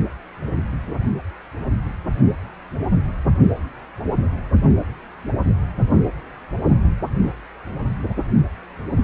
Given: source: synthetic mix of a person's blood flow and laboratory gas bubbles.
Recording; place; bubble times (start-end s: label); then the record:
Doppler ultrasound of blood flow; precordium
no bubbles
From the record:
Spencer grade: 0 (complete lack of bubble signals)